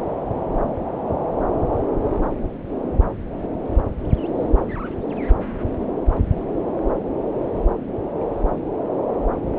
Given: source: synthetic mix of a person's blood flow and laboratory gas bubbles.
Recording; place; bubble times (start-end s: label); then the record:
Doppler ultrasound of blood flow; subclavian vein
no bubbles
From the record:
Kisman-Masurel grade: 000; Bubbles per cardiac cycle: 0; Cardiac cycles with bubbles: 0%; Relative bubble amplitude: no bubbles discernible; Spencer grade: 0 (complete lack of bubble signals)